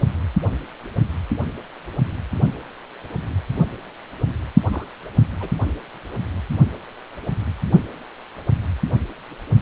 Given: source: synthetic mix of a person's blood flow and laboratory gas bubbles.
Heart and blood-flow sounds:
Doppler ultrasound of blood flow; precordium
4.70-4.85 s: bubbles
5.40-5.49 s: bubbles
From the record:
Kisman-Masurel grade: 111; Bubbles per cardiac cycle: 1 to 2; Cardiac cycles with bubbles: 1 to 10%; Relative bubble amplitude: barely perceptible (0.100 to 0.250); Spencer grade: 1 (occasional bubble signal discernible with the cardiac motion signal, with majority of cardiac periods free of bubbles); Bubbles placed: only in the low amplitude regions of the cardiac cycle

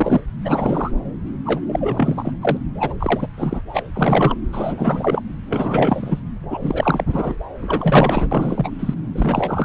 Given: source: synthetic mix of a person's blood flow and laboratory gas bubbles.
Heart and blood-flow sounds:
Doppler ultrasound of blood flow; subclavian vein
0.00-0.21 s: bubbles
0.44-0.91 s: bubbles
1.45-1.60 s: bubbles
1.68-2.32 s: bubbles
2.41-2.57 s: bubbles
2.79-2.94 s: bubbles
3.00-3.27 s: bubbles
3.36-3.61 s: bubbles
3.73-3.82 s: bubbles
3.93-4.35 s: bubbles
4.52-5.21 s: bubbles
5.50-6.20 s: bubbles
6.50-7.38 s: bubbles
7.62-8.28 s: bubbles
8.31-8.72 s: bubbles
8.79-8.95 s: bubbles
9.15-9.65 s: bubbles
From the record:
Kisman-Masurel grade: 343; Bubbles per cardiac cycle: rolling drumbeat, 9 or more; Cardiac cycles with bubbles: 100%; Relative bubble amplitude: loud (0.450 to 0.775); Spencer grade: 3 (all of the cardiac periods contain showers or single bubble signals, but not dominating or overriding the cardiac motion signals); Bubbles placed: anywhere in the cardiac cycle

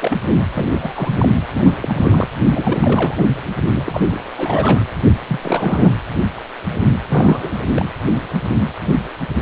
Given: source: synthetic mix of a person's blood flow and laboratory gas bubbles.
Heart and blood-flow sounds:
Doppler ultrasound of blood flow; precordium
0.00-0.18 s: bubbles
0.56-0.68 s: bubbles
0.71-0.93 s: bubbles
0.95-1.39 s: bubbles
1.53-1.79 s: bubbles
1.81-2.29 s: bubbles
2.55-3.43 s: bubbles
3.75-4.24 s: bubbles
4.36-4.82 s: bubbles
5.28-5.90 s: bubbles
7.10-7.63 s: bubbles
7.66-7.71 s: bubbles
7.74-7.88 s: bubbles
From the record:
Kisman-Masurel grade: 332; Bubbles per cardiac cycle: rolling drumbeat, 9 or more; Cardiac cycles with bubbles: 50 to 99%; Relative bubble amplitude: moderate (0.250 to 0.450); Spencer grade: 3 (all of the cardiac periods contain showers or single bubble signals, but not dominating or overriding the cardiac motion signals); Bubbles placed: anywhere in the cardiac cycle

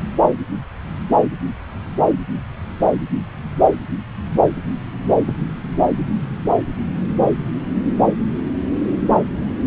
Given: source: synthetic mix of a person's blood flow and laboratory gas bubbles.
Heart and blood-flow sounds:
Doppler ultrasound of blood flow; subclavian vein
5.27-5.34 s: bubbles
From the record:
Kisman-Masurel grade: 112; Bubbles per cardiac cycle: 1 to 2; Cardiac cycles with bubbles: 1 to 10%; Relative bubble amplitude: moderate (0.250 to 0.450); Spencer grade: 1 (occasional bubble signal discernible with the cardiac motion signal, with majority of cardiac periods free of bubbles); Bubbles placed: anywhere in the cardiac cycle

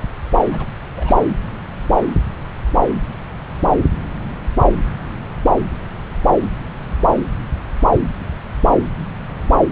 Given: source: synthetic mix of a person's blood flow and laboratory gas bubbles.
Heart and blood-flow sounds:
Doppler ultrasound of blood flow; subclavian vein
0.52-0.67 s: bubbles
0.96-1.19 s: bubbles
From the record:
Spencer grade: 1 (occasional bubble signal discernible with the cardiac motion signal, with majority of cardiac periods free of bubbles); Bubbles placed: anywhere in the cardiac cycle

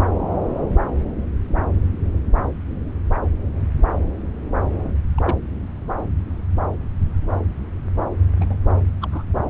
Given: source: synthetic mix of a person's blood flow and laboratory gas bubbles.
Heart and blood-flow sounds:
Doppler ultrasound of blood flow; subclavian vein
4.75-4.91 s: bubbles
5.17-5.36 s: bubbles
7.30-7.35 s: bubbles
8.41-8.56 s: bubbles
9.01-9.09 s: bubbles
9.11-9.24 s: bubbles
From the record:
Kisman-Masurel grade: 121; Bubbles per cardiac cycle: 1 to 2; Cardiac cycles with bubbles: 10 to 50%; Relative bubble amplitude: barely perceptible (0.100 to 0.250); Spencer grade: 2 (many but less than half of the cardiac periods contain bubble signals, singularly or in groups); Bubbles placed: anywhere in the cardiac cycle

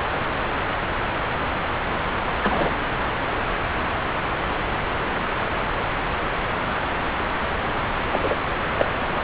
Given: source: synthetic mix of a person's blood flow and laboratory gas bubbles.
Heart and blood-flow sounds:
Doppler ultrasound of blood flow; subclavian vein
2.43-2.72 s: bubbles
8.12-8.35 s: bubbles
8.78-8.86 s: bubbles
From the record:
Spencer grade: 2 (many but less than half of the cardiac periods contain bubble signals, singularly or in groups); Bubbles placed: anywhere in the cardiac cycle

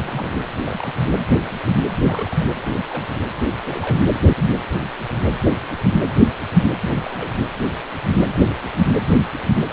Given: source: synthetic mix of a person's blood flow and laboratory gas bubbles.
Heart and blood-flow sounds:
Doppler ultrasound of blood flow; precordium
0.00-0.40 s: bubbles
0.56-1.02 s: bubbles
2.06-2.50 s: bubbles
2.55-2.62 s: bubbles
2.72-2.81 s: bubbles
2.90-3.04 s: bubbles
3.65-4.05 s: bubbles
6.75-7.35 s: bubbles
From the record:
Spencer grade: 2 (many but less than half of the cardiac periods contain bubble signals, singularly or in groups); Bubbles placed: anywhere in the cardiac cycle

